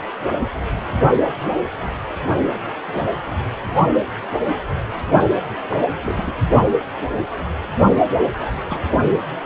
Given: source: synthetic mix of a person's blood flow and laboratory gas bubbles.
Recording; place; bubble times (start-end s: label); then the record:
Doppler ultrasound of blood flow; precordium
2.50-2.59 s: bubbles
2.87-3.06 s: bubbles
5.68-5.88 s: bubbles
6.02-6.35 s: bubbles
8.33-8.53 s: bubbles
8.60-8.92 s: bubbles
9.08-9.19 s: bubbles
From the record:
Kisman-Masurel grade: 221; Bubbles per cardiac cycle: several, 3 to 8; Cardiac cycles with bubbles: 10 to 50%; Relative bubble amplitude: barely perceptible (0.100 to 0.250); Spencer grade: 2 (many but less than half of the cardiac periods contain bubble signals, singularly or in groups); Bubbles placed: anywhere in the cardiac cycle